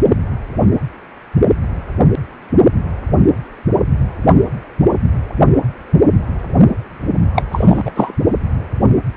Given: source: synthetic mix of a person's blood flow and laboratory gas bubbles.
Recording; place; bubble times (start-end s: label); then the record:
Doppler ultrasound of blood flow; precordium
7.35-7.43 s: bubbles
7.53-7.92 s: bubbles
7.96-8.12 s: bubbles
From the record:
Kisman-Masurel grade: 213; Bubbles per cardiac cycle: several, 3 to 8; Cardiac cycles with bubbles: 1 to 10%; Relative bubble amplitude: loud (0.450 to 0.775); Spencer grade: 1 (occasional bubble signal discernible with the cardiac motion signal, with majority of cardiac periods free of bubbles); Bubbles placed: only in the low amplitude regions of the cardiac cycle